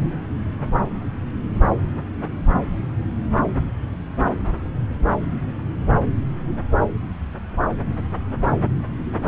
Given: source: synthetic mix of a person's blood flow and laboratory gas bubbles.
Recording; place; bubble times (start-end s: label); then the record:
Doppler ultrasound of blood flow; subclavian vein
no bubbles
From the record:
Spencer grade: 0 (complete lack of bubble signals)